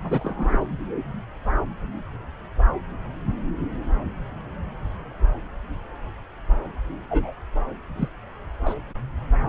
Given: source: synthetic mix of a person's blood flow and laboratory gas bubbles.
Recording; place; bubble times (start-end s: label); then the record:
Doppler ultrasound of blood flow; subclavian vein
0.03-0.67 s: bubbles
7.10-7.33 s: bubbles
7.97-8.09 s: bubbles
8.65-8.75 s: bubbles
From the record:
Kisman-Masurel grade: 122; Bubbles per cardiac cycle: 1 to 2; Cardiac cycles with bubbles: 10 to 50%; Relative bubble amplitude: moderate (0.250 to 0.450); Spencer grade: 2 (many but less than half of the cardiac periods contain bubble signals, singularly or in groups); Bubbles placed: anywhere in the cardiac cycle